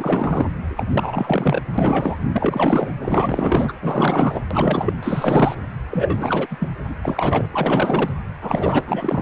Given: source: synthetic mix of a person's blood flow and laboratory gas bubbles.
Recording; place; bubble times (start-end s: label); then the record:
Doppler ultrasound of blood flow; precordium
0.00-0.46 s: bubbles
0.77-0.84 s: bubbles
0.90-1.62 s: bubbles
1.77-2.18 s: bubbles
2.32-2.92 s: bubbles
3.01-3.73 s: bubbles
3.81-4.42 s: bubbles
4.50-4.94 s: bubbles
5.03-5.56 s: bubbles
5.90-6.47 s: bubbles
6.50-6.57 s: bubbles
6.59-6.69 s: bubbles
6.88-6.95 s: bubbles
7.03-7.47 s: bubbles
7.53-8.13 s: bubbles
8.41-9.22 s: bubbles
From the record:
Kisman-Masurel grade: 444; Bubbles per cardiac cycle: continuous sound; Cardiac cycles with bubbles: 100%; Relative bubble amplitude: maximal (0.775 to 0.999); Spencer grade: 4 (maximum detectable bubble signal sounding continuously throughout systole and diastole of every cardiac period, and overriding the amplitude of the normal cardiac signals); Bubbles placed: anywhere in the cardiac cycle